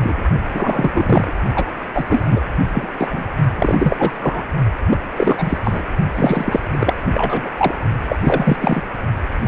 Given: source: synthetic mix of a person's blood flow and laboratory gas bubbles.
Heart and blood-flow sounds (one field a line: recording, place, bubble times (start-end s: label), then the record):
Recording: Doppler ultrasound of blood flow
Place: precordium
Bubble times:
0.00-0.22 s: bubbles
0.53-1.33 s: bubbles
1.55-1.66 s: bubbles
1.95-2.04 s: bubbles
2.07-2.40 s: bubbles
2.58-2.67 s: bubbles
2.73-2.88 s: bubbles
2.97-3.27 s: bubbles
3.56-4.44 s: bubbles
4.90-4.97 s: bubbles
5.16-5.58 s: bubbles
5.63-5.83 s: bubbles
6.14-7.02 s: bubbles
7.11-7.50 s: bubbles
7.57-7.75 s: bubbles
8.08-8.16 s: bubbles
8.23-8.58 s: bubbles
8.61-8.82 s: bubbles
9.45-9.47 s: bubbles
From the record:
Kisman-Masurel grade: 343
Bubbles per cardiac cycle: rolling drumbeat, 9 or more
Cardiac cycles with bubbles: 100%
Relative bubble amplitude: loud (0.450 to 0.775)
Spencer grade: 3 (all of the cardiac periods contain showers or single bubble signals, but not dominating or overriding the cardiac motion signals)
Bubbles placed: only in the low amplitude regions of the cardiac cycle